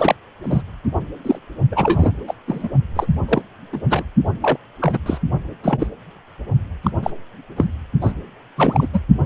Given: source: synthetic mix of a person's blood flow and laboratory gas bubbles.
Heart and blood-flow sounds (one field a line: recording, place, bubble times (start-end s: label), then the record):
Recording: Doppler ultrasound of blood flow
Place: precordium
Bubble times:
0.00-0.15 s: bubbles
0.43-0.61 s: bubbles
1.24-1.39 s: bubbles
1.71-2.12 s: bubbles
2.27-2.34 s: bubbles
2.47-2.69 s: bubbles
2.96-3.06 s: bubbles
3.28-3.42 s: bubbles
3.72-3.81 s: bubbles
3.90-4.04 s: bubbles
4.42-4.57 s: bubbles
4.81-4.99 s: bubbles
5.06-5.18 s: bubbles
5.63-5.87 s: bubbles
6.83-6.91 s: bubbles
7.03-7.11 s: bubbles
7.56-7.65 s: bubbles
8.01-8.12 s: bubbles
8.56-8.87 s: bubbles
8.93-8.99 s: bubbles
From the record:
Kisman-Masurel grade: 243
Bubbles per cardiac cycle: several, 3 to 8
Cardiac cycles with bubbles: 100%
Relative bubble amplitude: loud (0.450 to 0.775)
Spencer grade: 3 (all of the cardiac periods contain showers or single bubble signals, but not dominating or overriding the cardiac motion signals)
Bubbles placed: only in the low amplitude regions of the cardiac cycle